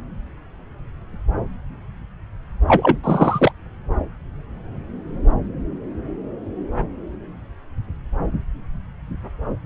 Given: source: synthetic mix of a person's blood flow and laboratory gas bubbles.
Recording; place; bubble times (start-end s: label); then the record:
Doppler ultrasound of blood flow; subclavian vein
2.68-2.98 s: bubbles
3.04-3.52 s: bubbles
From the record:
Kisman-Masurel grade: 223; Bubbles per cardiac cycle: several, 3 to 8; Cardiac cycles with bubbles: 10 to 50%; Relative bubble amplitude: loud (0.450 to 0.775); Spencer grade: 2 (many but less than half of the cardiac periods contain bubble signals, singularly or in groups); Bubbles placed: anywhere in the cardiac cycle